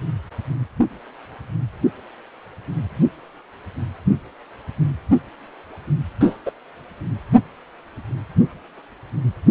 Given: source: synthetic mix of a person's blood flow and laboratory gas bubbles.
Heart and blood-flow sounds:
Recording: Doppler ultrasound of blood flow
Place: precordium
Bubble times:
6.20-6.37 s: bubbles
6.46-6.51 s: bubbles
From the record:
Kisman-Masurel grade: 123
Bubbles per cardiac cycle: 1 to 2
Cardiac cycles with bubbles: 10 to 50%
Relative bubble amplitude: loud (0.450 to 0.775)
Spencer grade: 2 (many but less than half of the cardiac periods contain bubble signals, singularly or in groups)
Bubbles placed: anywhere in the cardiac cycle

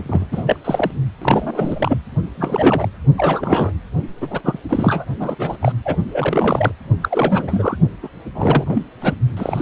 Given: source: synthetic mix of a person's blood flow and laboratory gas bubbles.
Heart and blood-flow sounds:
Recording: Doppler ultrasound of blood flow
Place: precordium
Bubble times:
0.06-0.27 s: bubbles
0.32-0.56 s: bubbles
0.64-0.91 s: bubbles
1.21-1.98 s: bubbles
2.37-2.88 s: bubbles
3.17-3.72 s: bubbles
4.21-4.39 s: bubbles
4.43-4.59 s: bubbles
4.69-5.05 s: bubbles
5.19-5.35 s: bubbles
5.38-5.57 s: bubbles
5.60-5.72 s: bubbles
5.84-5.96 s: bubbles
6.09-6.71 s: bubbles
7.02-7.76 s: bubbles
8.03-8.09 s: bubbles
8.35-8.85 s: bubbles
9.01-9.15 s: bubbles
9.37-9.62 s: bubbles
From the record:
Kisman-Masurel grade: 342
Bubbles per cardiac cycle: rolling drumbeat, 9 or more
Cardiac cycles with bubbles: 100%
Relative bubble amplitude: moderate (0.250 to 0.450)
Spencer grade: 3 (all of the cardiac periods contain showers or single bubble signals, but not dominating or overriding the cardiac motion signals)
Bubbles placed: only in the low amplitude regions of the cardiac cycle

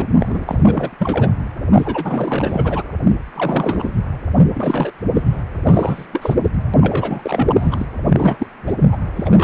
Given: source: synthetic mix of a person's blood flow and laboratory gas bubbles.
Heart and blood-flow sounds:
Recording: Doppler ultrasound of blood flow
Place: precordium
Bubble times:
0.00-0.07 s: bubbles
0.20-0.44 s: bubbles
0.47-1.32 s: bubbles
1.63-2.83 s: bubbles
3.33-3.92 s: bubbles
4.54-4.92 s: bubbles
5.14-5.43 s: bubbles
5.66-6.06 s: bubbles
6.12-6.34 s: bubbles
6.43-6.50 s: bubbles
6.81-7.86 s: bubbles
8.09-8.46 s: bubbles
8.66-8.73 s: bubbles
8.79-8.86 s: bubbles
8.91-8.99 s: bubbles
9.15-9.44 s: bubbles
From the record:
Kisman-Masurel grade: 343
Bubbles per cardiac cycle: rolling drumbeat, 9 or more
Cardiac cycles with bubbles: 100%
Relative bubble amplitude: loud (0.450 to 0.775)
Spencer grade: 3 (all of the cardiac periods contain showers or single bubble signals, but not dominating or overriding the cardiac motion signals)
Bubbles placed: anywhere in the cardiac cycle

